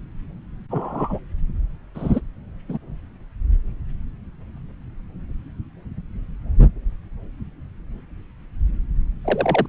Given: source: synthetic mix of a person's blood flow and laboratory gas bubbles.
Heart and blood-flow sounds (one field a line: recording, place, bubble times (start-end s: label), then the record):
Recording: Doppler ultrasound of blood flow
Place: subclavian vein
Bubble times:
0.71-1.19 s: bubbles
1.95-2.20 s: bubbles
2.68-2.78 s: bubbles
9.24-9.66 s: bubbles
From the record:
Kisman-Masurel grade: 122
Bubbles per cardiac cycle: 1 to 2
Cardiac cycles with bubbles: 10 to 50%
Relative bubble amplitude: moderate (0.250 to 0.450)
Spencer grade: 2 (many but less than half of the cardiac periods contain bubble signals, singularly or in groups)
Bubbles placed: anywhere in the cardiac cycle